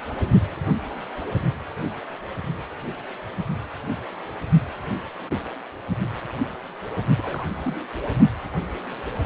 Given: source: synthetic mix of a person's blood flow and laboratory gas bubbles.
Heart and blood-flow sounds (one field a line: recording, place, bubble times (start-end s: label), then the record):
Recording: Doppler ultrasound of blood flow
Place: precordium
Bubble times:
7.18-7.44 s: bubbles
7.65-7.74 s: bubbles
From the record:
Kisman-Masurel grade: 221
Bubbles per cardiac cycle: several, 3 to 8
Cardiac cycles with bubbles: 10 to 50%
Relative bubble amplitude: barely perceptible (0.100 to 0.250)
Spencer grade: 2 (many but less than half of the cardiac periods contain bubble signals, singularly or in groups)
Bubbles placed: only in the low amplitude regions of the cardiac cycle